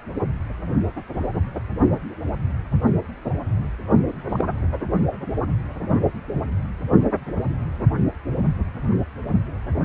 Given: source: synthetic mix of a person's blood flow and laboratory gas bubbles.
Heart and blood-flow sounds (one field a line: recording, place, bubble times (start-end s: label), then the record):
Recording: Doppler ultrasound of blood flow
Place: precordium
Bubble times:
1.14-1.31 s: bubbles
4.29-4.45 s: bubbles
From the record:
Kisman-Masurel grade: 121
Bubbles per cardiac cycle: 1 to 2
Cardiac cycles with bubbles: 10 to 50%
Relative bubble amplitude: barely perceptible (0.100 to 0.250)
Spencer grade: 2 (many but less than half of the cardiac periods contain bubble signals, singularly or in groups)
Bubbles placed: only in the low amplitude regions of the cardiac cycle